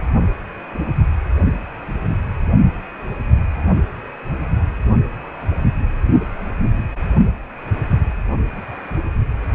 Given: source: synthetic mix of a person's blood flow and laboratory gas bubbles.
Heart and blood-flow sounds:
Doppler ultrasound of blood flow; precordium
no bubbles
From the record:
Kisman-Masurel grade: 000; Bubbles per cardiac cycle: 0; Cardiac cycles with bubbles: 0%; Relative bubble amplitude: no bubbles discernible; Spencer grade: 0 (complete lack of bubble signals)

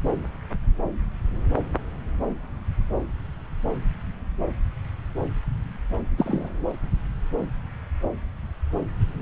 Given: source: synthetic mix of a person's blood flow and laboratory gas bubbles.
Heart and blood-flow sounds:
Doppler ultrasound of blood flow; subclavian vein
6.17-6.50 s: bubbles
From the record:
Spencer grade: 1 (occasional bubble signal discernible with the cardiac motion signal, with majority of cardiac periods free of bubbles); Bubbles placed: anywhere in the cardiac cycle

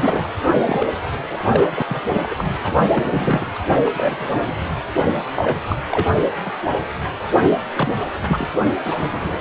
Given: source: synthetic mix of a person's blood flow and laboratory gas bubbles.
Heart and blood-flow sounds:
Doppler ultrasound of blood flow; precordium
0.00-0.29 s: bubbles
0.67-0.89 s: bubbles
1.30-1.68 s: bubbles
1.71-1.82 s: bubbles
1.88-2.05 s: bubbles
2.08-2.35 s: bubbles
2.38-2.45 s: bubbles
2.62-2.74 s: bubbles
2.96-3.59 s: bubbles
3.85-3.90 s: bubbles
3.94-4.61 s: bubbles
5.36-5.58 s: bubbles
5.65-5.80 s: bubbles
5.92-6.11 s: bubbles
6.45-6.51 s: bubbles
7.37-7.57 s: bubbles
7.73-7.94 s: bubbles
8.28-8.49 s: bubbles
8.85-9.41 s: bubbles
From the record:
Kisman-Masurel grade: 242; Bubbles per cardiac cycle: several, 3 to 8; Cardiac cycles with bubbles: 100%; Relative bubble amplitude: moderate (0.250 to 0.450); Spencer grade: 3 (all of the cardiac periods contain showers or single bubble signals, but not dominating or overriding the cardiac motion signals); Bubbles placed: anywhere in the cardiac cycle

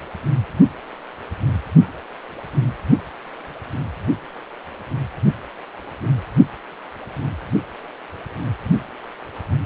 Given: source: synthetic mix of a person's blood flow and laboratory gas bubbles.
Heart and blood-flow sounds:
Doppler ultrasound of blood flow; precordium
no bubbles
From the record:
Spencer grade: 0 (complete lack of bubble signals)

